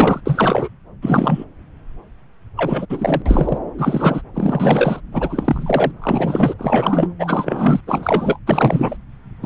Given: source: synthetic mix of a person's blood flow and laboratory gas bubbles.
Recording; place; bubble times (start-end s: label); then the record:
Doppler ultrasound of blood flow; subclavian vein
0.00-0.21 s: bubbles
0.25-0.69 s: bubbles
1.02-1.45 s: bubbles
2.57-2.86 s: bubbles
2.90-3.22 s: bubbles
3.25-3.59 s: bubbles
3.77-4.21 s: bubbles
4.34-5.00 s: bubbles
5.11-5.92 s: bubbles
6.01-6.53 s: bubbles
6.58-7.07 s: bubbles
7.19-7.80 s: bubbles
7.87-8.39 s: bubbles
8.46-8.96 s: bubbles
9.42-9.46 s: bubbles
From the record:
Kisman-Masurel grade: 333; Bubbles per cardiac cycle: rolling drumbeat, 9 or more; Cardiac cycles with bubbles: 50 to 99%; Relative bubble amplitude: loud (0.450 to 0.775); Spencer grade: 3 (all of the cardiac periods contain showers or single bubble signals, but not dominating or overriding the cardiac motion signals); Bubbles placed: anywhere in the cardiac cycle